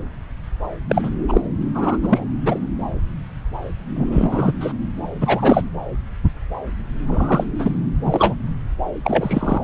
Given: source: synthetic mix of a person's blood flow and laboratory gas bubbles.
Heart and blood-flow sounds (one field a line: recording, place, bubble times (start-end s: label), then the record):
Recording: Doppler ultrasound of blood flow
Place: subclavian vein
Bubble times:
0.88-1.10 s: bubbles
1.28-1.41 s: bubbles
1.75-1.99 s: bubbles
2.02-2.24 s: bubbles
2.46-2.58 s: bubbles
3.96-4.53 s: bubbles
4.60-4.72 s: bubbles
5.20-5.62 s: bubbles
7.06-7.44 s: bubbles
7.58-7.79 s: bubbles
8.04-8.34 s: bubbles
9.04-9.58 s: bubbles
9.61-9.64 s: bubbles
From the record:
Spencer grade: 3 (all of the cardiac periods contain showers or single bubble signals, but not dominating or overriding the cardiac motion signals)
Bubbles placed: anywhere in the cardiac cycle